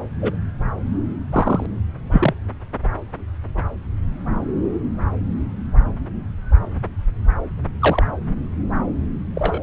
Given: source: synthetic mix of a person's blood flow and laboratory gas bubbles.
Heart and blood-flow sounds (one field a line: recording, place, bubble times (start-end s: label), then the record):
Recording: Doppler ultrasound of blood flow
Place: subclavian vein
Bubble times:
0.21-0.36 s: bubbles
1.32-1.66 s: bubbles
2.11-2.33 s: bubbles
7.79-8.07 s: bubbles
9.35-9.63 s: bubbles
From the record:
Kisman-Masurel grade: 123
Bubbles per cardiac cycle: 1 to 2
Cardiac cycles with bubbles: 10 to 50%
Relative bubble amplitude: loud (0.450 to 0.775)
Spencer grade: 2 (many but less than half of the cardiac periods contain bubble signals, singularly or in groups)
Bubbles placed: anywhere in the cardiac cycle